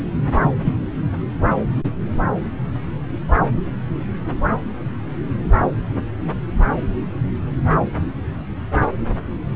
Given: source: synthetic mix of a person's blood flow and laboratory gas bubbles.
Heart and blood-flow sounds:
Doppler ultrasound of blood flow; subclavian vein
0.42-0.51 s: bubbles
0.65-0.77 s: bubbles
From the record:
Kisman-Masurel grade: 113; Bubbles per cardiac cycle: 1 to 2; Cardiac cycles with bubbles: 1 to 10%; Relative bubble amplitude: loud (0.450 to 0.775); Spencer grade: 1 (occasional bubble signal discernible with the cardiac motion signal, with majority of cardiac periods free of bubbles); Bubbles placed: anywhere in the cardiac cycle

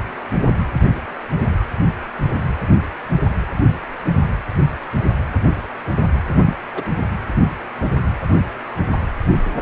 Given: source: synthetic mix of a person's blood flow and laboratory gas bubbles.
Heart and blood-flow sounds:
Doppler ultrasound of blood flow; precordium
6.44-6.55 s: bubbles
6.75-6.83 s: bubbles
From the record:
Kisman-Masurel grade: 112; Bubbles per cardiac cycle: 1 to 2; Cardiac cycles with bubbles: 1 to 10%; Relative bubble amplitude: moderate (0.250 to 0.450); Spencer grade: 1 (occasional bubble signal discernible with the cardiac motion signal, with majority of cardiac periods free of bubbles); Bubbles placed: anywhere in the cardiac cycle

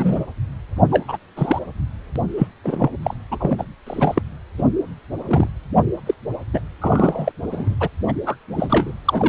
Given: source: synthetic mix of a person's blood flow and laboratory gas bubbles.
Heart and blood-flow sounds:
Doppler ultrasound of blood flow; precordium
0.00-0.25 s: bubbles
0.91-1.17 s: bubbles
1.36-1.59 s: bubbles
2.15-2.21 s: bubbles
2.37-2.48 s: bubbles
2.64-2.89 s: bubbles
3.03-3.15 s: bubbles
3.31-3.64 s: bubbles
3.87-4.22 s: bubbles
4.58-4.62 s: bubbles
5.25-5.47 s: bubbles
6.06-6.14 s: bubbles
6.53-6.60 s: bubbles
6.81-7.32 s: bubbles
7.51-7.75 s: bubbles
7.80-7.88 s: bubbles
8.08-8.12 s: bubbles
8.26-8.36 s: bubbles
8.53-8.92 s: bubbles
9.05-9.29 s: bubbles
From the record:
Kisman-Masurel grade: 243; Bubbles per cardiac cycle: several, 3 to 8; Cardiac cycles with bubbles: 100%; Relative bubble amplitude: loud (0.450 to 0.775); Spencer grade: 3 (all of the cardiac periods contain showers or single bubble signals, but not dominating or overriding the cardiac motion signals); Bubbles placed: anywhere in the cardiac cycle

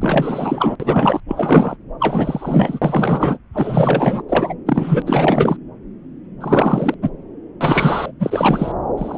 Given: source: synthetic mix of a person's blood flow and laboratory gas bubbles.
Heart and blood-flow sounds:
Doppler ultrasound of blood flow; subclavian vein
0.01-0.76 s: bubbles
0.80-1.21 s: bubbles
1.29-1.77 s: bubbles
2.00-3.39 s: bubbles
3.54-4.23 s: bubbles
4.29-4.54 s: bubbles
4.66-5.02 s: bubbles
5.05-5.57 s: bubbles
6.41-6.95 s: bubbles
7.01-7.09 s: bubbles
7.60-8.11 s: bubbles
8.19-8.72 s: bubbles
8.97-9.18 s: bubbles
From the record:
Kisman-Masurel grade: 333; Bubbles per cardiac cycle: rolling drumbeat, 9 or more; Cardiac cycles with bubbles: 50 to 99%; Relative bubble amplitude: loud (0.450 to 0.775); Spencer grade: 3 (all of the cardiac periods contain showers or single bubble signals, but not dominating or overriding the cardiac motion signals); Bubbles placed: anywhere in the cardiac cycle

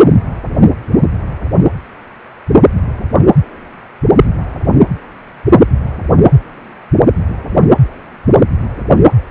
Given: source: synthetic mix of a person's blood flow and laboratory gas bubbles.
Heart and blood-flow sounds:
Doppler ultrasound of blood flow; precordium
no bubbles
From the record:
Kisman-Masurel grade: 000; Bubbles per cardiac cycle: 0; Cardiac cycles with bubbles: 0%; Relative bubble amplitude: no bubbles discernible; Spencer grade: 0 (complete lack of bubble signals)

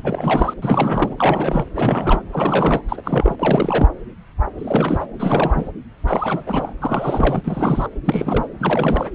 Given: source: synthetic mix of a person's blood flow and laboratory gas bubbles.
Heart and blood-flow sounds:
Doppler ultrasound of blood flow; subclavian vein
0.03-0.54 s: bubbles
0.62-1.65 s: bubbles
1.75-2.22 s: bubbles
2.32-2.81 s: bubbles
2.88-3.00 s: bubbles
3.03-3.35 s: bubbles
3.39-3.89 s: bubbles
4.58-5.06 s: bubbles
5.19-5.71 s: bubbles
6.07-6.43 s: bubbles
6.47-6.73 s: bubbles
6.82-7.42 s: bubbles
7.44-7.88 s: bubbles
8.04-8.47 s: bubbles
8.60-9.11 s: bubbles
From the record:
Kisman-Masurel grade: 332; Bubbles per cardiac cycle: rolling drumbeat, 9 or more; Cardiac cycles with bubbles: 50 to 99%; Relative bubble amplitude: moderate (0.250 to 0.450); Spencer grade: 3 (all of the cardiac periods contain showers or single bubble signals, but not dominating or overriding the cardiac motion signals); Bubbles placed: anywhere in the cardiac cycle

